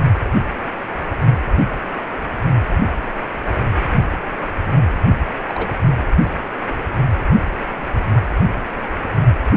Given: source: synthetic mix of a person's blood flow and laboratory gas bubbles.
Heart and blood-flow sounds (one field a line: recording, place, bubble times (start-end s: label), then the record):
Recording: Doppler ultrasound of blood flow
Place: precordium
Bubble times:
5.47-5.76 s: bubbles
From the record:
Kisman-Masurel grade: 112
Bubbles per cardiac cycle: 1 to 2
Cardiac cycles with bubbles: 1 to 10%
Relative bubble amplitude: moderate (0.250 to 0.450)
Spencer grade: 1 (occasional bubble signal discernible with the cardiac motion signal, with majority of cardiac periods free of bubbles)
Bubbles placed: anywhere in the cardiac cycle